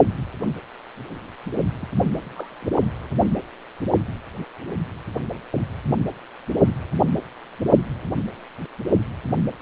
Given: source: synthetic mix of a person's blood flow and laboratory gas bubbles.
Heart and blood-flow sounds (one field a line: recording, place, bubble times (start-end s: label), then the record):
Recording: Doppler ultrasound of blood flow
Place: precordium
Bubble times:
1.81-1.86 s: bubbles
2.15-2.19 s: bubbles
2.21-2.65 s: bubbles
From the record:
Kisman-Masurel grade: 211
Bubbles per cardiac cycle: several, 3 to 8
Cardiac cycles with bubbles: 1 to 10%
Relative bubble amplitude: barely perceptible (0.100 to 0.250)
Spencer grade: 1 (occasional bubble signal discernible with the cardiac motion signal, with majority of cardiac periods free of bubbles)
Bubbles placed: only in the low amplitude regions of the cardiac cycle